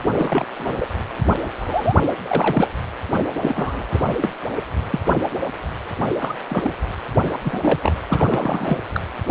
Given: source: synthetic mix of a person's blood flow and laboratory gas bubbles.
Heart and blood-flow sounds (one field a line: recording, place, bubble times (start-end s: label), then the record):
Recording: Doppler ultrasound of blood flow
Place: precordium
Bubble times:
0.17-0.45 s: bubbles
0.59-0.76 s: bubbles
0.79-0.86 s: bubbles
1.58-1.94 s: bubbles
2.22-2.68 s: bubbles
3.42-4.13 s: bubbles
4.21-4.29 s: bubbles
4.91-5.00 s: bubbles
6.17-6.34 s: bubbles
6.49-6.71 s: bubbles
7.24-7.32 s: bubbles
7.44-7.93 s: bubbles
8.06-8.78 s: bubbles
8.95-9.00 s: bubbles
From the record:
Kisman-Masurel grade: 232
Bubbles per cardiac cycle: several, 3 to 8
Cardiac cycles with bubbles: 50 to 99%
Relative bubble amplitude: moderate (0.250 to 0.450)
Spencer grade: 3 (all of the cardiac periods contain showers or single bubble signals, but not dominating or overriding the cardiac motion signals)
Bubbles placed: anywhere in the cardiac cycle